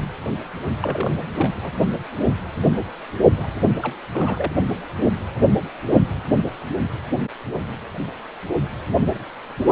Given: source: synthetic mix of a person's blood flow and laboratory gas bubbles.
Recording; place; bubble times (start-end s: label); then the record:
Doppler ultrasound of blood flow; precordium
0.00-0.04 s: bubbles
0.82-1.11 s: bubbles
1.36-1.72 s: bubbles
3.37-3.47 s: bubbles
3.82-3.98 s: bubbles
4.11-4.52 s: bubbles
From the record:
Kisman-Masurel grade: 221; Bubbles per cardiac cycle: several, 3 to 8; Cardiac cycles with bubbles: 10 to 50%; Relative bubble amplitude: barely perceptible (0.100 to 0.250); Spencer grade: 2 (many but less than half of the cardiac periods contain bubble signals, singularly or in groups); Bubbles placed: only in the low amplitude regions of the cardiac cycle